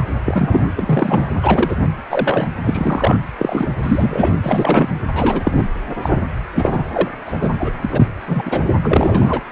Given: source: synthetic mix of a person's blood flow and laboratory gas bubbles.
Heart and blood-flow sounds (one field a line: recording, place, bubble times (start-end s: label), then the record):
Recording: Doppler ultrasound of blood flow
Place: precordium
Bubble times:
0.00-0.04 s: bubbles
0.25-0.67 s: bubbles
0.76-1.32 s: bubbles
1.42-1.76 s: bubbles
2.09-2.48 s: bubbles
2.64-3.20 s: bubbles
3.38-3.67 s: bubbles
3.83-4.32 s: bubbles
4.42-4.89 s: bubbles
5.13-5.66 s: bubbles
6.02-6.23 s: bubbles
6.53-6.85 s: bubbles
6.92-7.08 s: bubbles
7.25-7.52 s: bubbles
7.60-7.71 s: bubbles
7.81-8.12 s: bubbles
8.27-8.42 s: bubbles
8.45-8.67 s: bubbles
8.84-9.40 s: bubbles
From the record:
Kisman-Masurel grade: 243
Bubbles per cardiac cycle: several, 3 to 8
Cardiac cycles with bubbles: 100%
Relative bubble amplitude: loud (0.450 to 0.775)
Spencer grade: 3 (all of the cardiac periods contain showers or single bubble signals, but not dominating or overriding the cardiac motion signals)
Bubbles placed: anywhere in the cardiac cycle